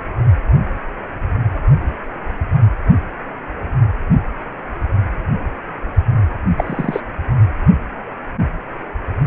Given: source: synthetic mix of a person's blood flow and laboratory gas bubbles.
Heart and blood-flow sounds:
Doppler ultrasound of blood flow; precordium
6.57-7.00 s: bubbles
From the record:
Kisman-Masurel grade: 212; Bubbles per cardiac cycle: several, 3 to 8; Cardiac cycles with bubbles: 1 to 10%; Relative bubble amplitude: moderate (0.250 to 0.450); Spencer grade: 1 (occasional bubble signal discernible with the cardiac motion signal, with majority of cardiac periods free of bubbles); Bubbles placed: anywhere in the cardiac cycle

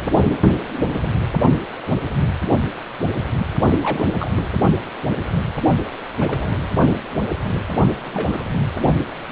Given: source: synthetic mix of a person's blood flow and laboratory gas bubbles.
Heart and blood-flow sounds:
Doppler ultrasound of blood flow; precordium
0.00-0.10 s: bubbles
3.82-4.14 s: bubbles
4.20-4.31 s: bubbles
4.37-4.49 s: bubbles
6.17-6.58 s: bubbles
8.12-8.45 s: bubbles
From the record:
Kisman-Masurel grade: 221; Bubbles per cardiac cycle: several, 3 to 8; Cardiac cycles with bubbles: 10 to 50%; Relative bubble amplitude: barely perceptible (0.100 to 0.250); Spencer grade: 2 (many but less than half of the cardiac periods contain bubble signals, singularly or in groups); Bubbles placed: only in the low amplitude regions of the cardiac cycle

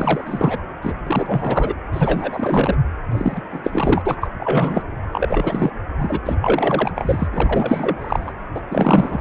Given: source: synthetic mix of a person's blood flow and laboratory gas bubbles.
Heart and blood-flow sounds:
Doppler ultrasound of blood flow; precordium
0.00-0.62 s: bubbles
0.83-0.94 s: bubbles
1.07-1.74 s: bubbles
1.93-2.75 s: bubbles
3.11-3.42 s: bubbles
3.52-4.02 s: bubbles
4.05-4.29 s: bubbles
4.39-4.82 s: bubbles
5.12-5.71 s: bubbles
5.98-6.21 s: bubbles
6.25-6.35 s: bubbles
6.42-6.92 s: bubbles
6.96-7.27 s: bubbles
7.32-8.33 s: bubbles
8.54-8.61 s: bubbles
8.71-9.21 s: bubbles
From the record:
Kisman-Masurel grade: 343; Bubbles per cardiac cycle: rolling drumbeat, 9 or more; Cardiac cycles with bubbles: 100%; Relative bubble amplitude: loud (0.450 to 0.775); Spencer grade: 3 (all of the cardiac periods contain showers or single bubble signals, but not dominating or overriding the cardiac motion signals); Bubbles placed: anywhere in the cardiac cycle

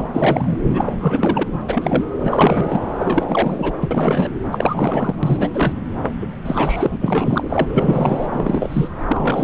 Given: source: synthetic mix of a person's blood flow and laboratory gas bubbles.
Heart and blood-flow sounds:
Doppler ultrasound of blood flow; subclavian vein
0.00-0.57 s: bubbles
0.71-1.44 s: bubbles
1.47-1.60 s: bubbles
1.67-2.04 s: bubbles
2.20-2.79 s: bubbles
2.98-3.73 s: bubbles
3.81-3.88 s: bubbles
3.91-4.29 s: bubbles
4.51-5.14 s: bubbles
5.22-5.50 s: bubbles
5.54-5.72 s: bubbles
6.21-6.26 s: bubbles
6.45-6.97 s: bubbles
7.00-8.27 s: bubbles
8.33-8.88 s: bubbles
9.07-9.44 s: bubbles
From the record:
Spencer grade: 3 (all of the cardiac periods contain showers or single bubble signals, but not dominating or overriding the cardiac motion signals); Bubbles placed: anywhere in the cardiac cycle

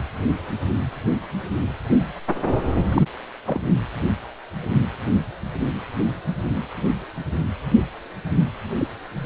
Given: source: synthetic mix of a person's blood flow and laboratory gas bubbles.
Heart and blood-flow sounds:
Doppler ultrasound of blood flow; precordium
2.89-3.02 s: bubbles
3.46-3.62 s: bubbles
8.78-8.88 s: bubbles
From the record:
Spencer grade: 1 (occasional bubble signal discernible with the cardiac motion signal, with majority of cardiac periods free of bubbles); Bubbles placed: anywhere in the cardiac cycle

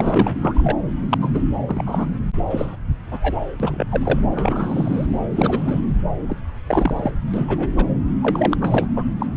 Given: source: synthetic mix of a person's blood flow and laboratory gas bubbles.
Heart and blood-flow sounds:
Doppler ultrasound of blood flow; subclavian vein
0.00-0.72 s: bubbles
1.10-1.18 s: bubbles
1.21-1.42 s: bubbles
1.67-1.83 s: bubbles
1.86-2.05 s: bubbles
2.50-2.76 s: bubbles
3.11-3.19 s: bubbles
3.21-3.34 s: bubbles
3.59-3.86 s: bubbles
3.90-4.20 s: bubbles
4.32-5.06 s: bubbles
5.32-5.79 s: bubbles
6.29-6.37 s: bubbles
6.68-7.11 s: bubbles
7.33-7.69 s: bubbles
7.77-7.86 s: bubbles
8.21-8.57 s: bubbles
8.61-8.87 s: bubbles
8.96-9.04 s: bubbles
9.20-9.26 s: bubbles
From the record:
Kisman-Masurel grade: 242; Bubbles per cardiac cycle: several, 3 to 8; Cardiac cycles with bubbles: 100%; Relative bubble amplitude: moderate (0.250 to 0.450); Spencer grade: 3 (all of the cardiac periods contain showers or single bubble signals, but not dominating or overriding the cardiac motion signals); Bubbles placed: anywhere in the cardiac cycle

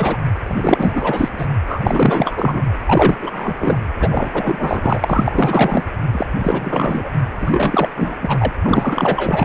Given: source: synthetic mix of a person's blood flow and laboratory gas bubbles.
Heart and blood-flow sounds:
Doppler ultrasound of blood flow; precordium
0.00-0.17 s: bubbles
0.46-1.29 s: bubbles
1.38-1.46 s: bubbles
1.67-1.81 s: bubbles
1.86-2.73 s: bubbles
2.85-3.18 s: bubbles
3.22-3.78 s: bubbles
4.00-4.30 s: bubbles
4.33-5.84 s: bubbles
6.11-6.26 s: bubbles
6.38-7.10 s: bubbles
7.39-7.90 s: bubbles
7.96-8.15 s: bubbles
8.22-8.53 s: bubbles
8.62-9.45 s: bubbles
From the record:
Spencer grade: 4 (maximum detectable bubble signal sounding continuously throughout systole and diastole of every cardiac period, and overriding the amplitude of the normal cardiac signals); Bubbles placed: anywhere in the cardiac cycle

